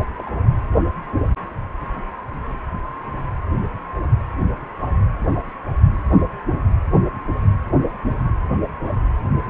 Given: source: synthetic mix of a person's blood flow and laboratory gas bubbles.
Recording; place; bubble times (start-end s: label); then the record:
Doppler ultrasound of blood flow; precordium
0.17-0.23 s: bubbles
0.26-0.30 s: bubbles
From the record:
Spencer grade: 1 (occasional bubble signal discernible with the cardiac motion signal, with majority of cardiac periods free of bubbles); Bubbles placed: anywhere in the cardiac cycle